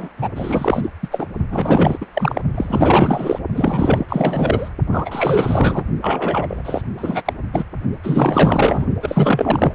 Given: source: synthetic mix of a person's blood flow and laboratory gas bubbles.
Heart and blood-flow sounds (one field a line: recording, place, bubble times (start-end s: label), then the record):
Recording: Doppler ultrasound of blood flow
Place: precordium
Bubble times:
0.00-0.08 s: bubbles
0.18-0.29 s: bubbles
0.35-0.89 s: bubbles
1.02-1.08 s: bubbles
1.11-1.27 s: bubbles
1.50-2.06 s: bubbles
2.13-2.42 s: bubbles
2.54-3.39 s: bubbles
3.54-4.05 s: bubbles
4.08-4.68 s: bubbles
4.92-5.86 s: bubbles
6.01-6.82 s: bubbles
6.97-7.33 s: bubbles
7.53-7.63 s: bubbles
8.03-8.86 s: bubbles
9.02-9.75 s: bubbles
From the record:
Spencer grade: 4 (maximum detectable bubble signal sounding continuously throughout systole and diastole of every cardiac period, and overriding the amplitude of the normal cardiac signals)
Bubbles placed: only in the low amplitude regions of the cardiac cycle